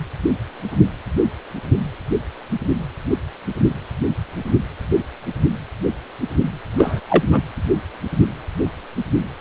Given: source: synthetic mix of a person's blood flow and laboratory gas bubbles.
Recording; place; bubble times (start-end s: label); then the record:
Doppler ultrasound of blood flow; precordium
6.76-7.00 s: bubbles
7.09-7.24 s: bubbles
7.29-7.42 s: bubbles
From the record:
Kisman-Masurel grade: 213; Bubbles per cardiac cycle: several, 3 to 8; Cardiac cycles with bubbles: 1 to 10%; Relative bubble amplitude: loud (0.450 to 0.775); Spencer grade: 1 (occasional bubble signal discernible with the cardiac motion signal, with majority of cardiac periods free of bubbles); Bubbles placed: anywhere in the cardiac cycle